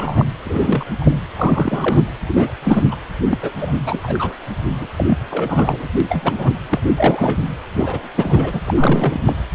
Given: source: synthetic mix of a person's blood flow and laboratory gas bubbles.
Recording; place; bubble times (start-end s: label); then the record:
Doppler ultrasound of blood flow; precordium
0.00-0.25 s: bubbles
0.45-0.84 s: bubbles
1.00-1.18 s: bubbles
1.36-2.04 s: bubbles
2.27-2.52 s: bubbles
2.62-2.84 s: bubbles
2.90-2.96 s: bubbles
3.31-3.38 s: bubbles
3.42-3.50 s: bubbles
3.58-3.74 s: bubbles
3.82-4.00 s: bubbles
4.03-4.33 s: bubbles
4.80-4.87 s: bubbles
4.97-5.18 s: bubbles
5.30-5.87 s: bubbles
6.00-6.54 s: bubbles
6.69-6.81 s: bubbles
6.96-7.46 s: bubbles
7.76-8.09 s: bubbles
8.17-8.61 s: bubbles
8.66-9.36 s: bubbles
From the record:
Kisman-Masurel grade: 342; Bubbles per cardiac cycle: rolling drumbeat, 9 or more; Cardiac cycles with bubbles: 100%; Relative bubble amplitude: moderate (0.250 to 0.450); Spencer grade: 3 (all of the cardiac periods contain showers or single bubble signals, but not dominating or overriding the cardiac motion signals); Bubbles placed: anywhere in the cardiac cycle